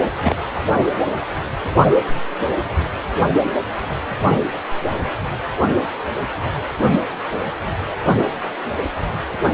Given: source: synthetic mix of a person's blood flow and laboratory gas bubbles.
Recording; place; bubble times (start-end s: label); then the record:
Doppler ultrasound of blood flow; precordium
0.23-0.36 s: bubbles
From the record:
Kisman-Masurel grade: 212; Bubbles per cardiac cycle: several, 3 to 8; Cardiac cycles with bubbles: 1 to 10%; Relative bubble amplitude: moderate (0.250 to 0.450); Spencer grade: 1 (occasional bubble signal discernible with the cardiac motion signal, with majority of cardiac periods free of bubbles); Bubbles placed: anywhere in the cardiac cycle